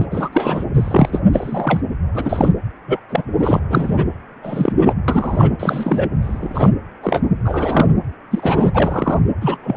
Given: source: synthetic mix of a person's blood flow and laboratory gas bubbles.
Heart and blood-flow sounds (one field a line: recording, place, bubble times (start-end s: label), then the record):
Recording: Doppler ultrasound of blood flow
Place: precordium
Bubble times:
0.00-0.05 s: bubbles
0.11-0.30 s: bubbles
0.32-0.65 s: bubbles
0.74-1.21 s: bubbles
1.33-1.82 s: bubbles
2.14-2.52 s: bubbles
2.88-3.00 s: bubbles
3.09-3.23 s: bubbles
3.39-3.61 s: bubbles
3.69-4.05 s: bubbles
4.43-4.72 s: bubbles
4.81-4.93 s: bubbles
5.08-5.54 s: bubbles
5.59-6.09 s: bubbles
6.22-6.70 s: bubbles
7.02-7.21 s: bubbles
7.44-7.86 s: bubbles
8.30-8.72 s: bubbles
8.74-9.19 s: bubbles
9.40-9.57 s: bubbles
9.62-9.77 s: bubbles
From the record:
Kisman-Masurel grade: 243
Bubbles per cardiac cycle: several, 3 to 8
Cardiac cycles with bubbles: 100%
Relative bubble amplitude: loud (0.450 to 0.775)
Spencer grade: 3 (all of the cardiac periods contain showers or single bubble signals, but not dominating or overriding the cardiac motion signals)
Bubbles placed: anywhere in the cardiac cycle